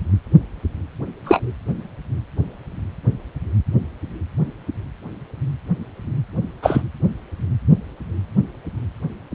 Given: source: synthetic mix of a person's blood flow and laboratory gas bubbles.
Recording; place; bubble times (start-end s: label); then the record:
Doppler ultrasound of blood flow; precordium
1.24-1.51 s: bubbles
6.62-6.82 s: bubbles
From the record:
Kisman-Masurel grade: 123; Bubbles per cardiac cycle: 1 to 2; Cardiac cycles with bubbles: 10 to 50%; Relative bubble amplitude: loud (0.450 to 0.775); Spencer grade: 2 (many but less than half of the cardiac periods contain bubble signals, singularly or in groups); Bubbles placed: anywhere in the cardiac cycle